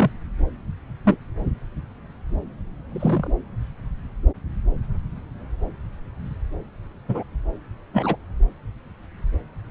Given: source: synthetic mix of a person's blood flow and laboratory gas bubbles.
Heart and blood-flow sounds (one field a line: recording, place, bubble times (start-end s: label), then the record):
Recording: Doppler ultrasound of blood flow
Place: subclavian vein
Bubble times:
0.00-0.11 s: bubbles
1.04-1.17 s: bubbles
2.89-3.33 s: bubbles
7.08-7.23 s: bubbles
7.93-8.15 s: bubbles
From the record:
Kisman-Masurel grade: 122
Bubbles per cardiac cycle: 1 to 2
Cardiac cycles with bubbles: 10 to 50%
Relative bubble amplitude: moderate (0.250 to 0.450)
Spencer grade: 2 (many but less than half of the cardiac periods contain bubble signals, singularly or in groups)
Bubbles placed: anywhere in the cardiac cycle